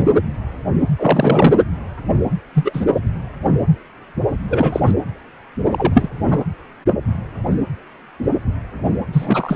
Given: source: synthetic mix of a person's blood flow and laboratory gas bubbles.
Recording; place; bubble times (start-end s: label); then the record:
Doppler ultrasound of blood flow; precordium
0.00-0.07 s: bubbles
0.97-1.54 s: bubbles
2.55-2.85 s: bubbles
4.48-4.80 s: bubbles
4.85-4.93 s: bubbles
5.71-6.08 s: bubbles
6.30-6.44 s: bubbles
9.12-9.56 s: bubbles
From the record:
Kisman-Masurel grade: 223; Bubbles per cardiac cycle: several, 3 to 8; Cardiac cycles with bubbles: 10 to 50%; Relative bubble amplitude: loud (0.450 to 0.775); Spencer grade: 2 (many but less than half of the cardiac periods contain bubble signals, singularly or in groups); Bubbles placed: anywhere in the cardiac cycle